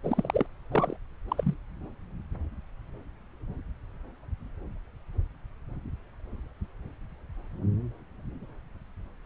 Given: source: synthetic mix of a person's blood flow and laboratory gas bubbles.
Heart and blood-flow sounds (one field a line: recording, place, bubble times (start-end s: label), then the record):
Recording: Doppler ultrasound of blood flow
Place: subclavian vein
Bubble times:
0.04-0.46 s: bubbles
0.71-0.96 s: bubbles
1.29-1.54 s: bubbles
From the record:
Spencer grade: 1 (occasional bubble signal discernible with the cardiac motion signal, with majority of cardiac periods free of bubbles)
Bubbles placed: anywhere in the cardiac cycle